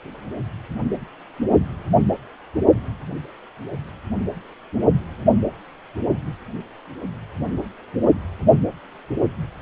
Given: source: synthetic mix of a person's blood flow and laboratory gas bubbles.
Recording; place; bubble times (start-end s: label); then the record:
Doppler ultrasound of blood flow; precordium
no bubbles
From the record:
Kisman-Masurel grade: 000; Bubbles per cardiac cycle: 0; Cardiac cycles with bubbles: 0%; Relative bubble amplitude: no bubbles discernible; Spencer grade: 0 (complete lack of bubble signals)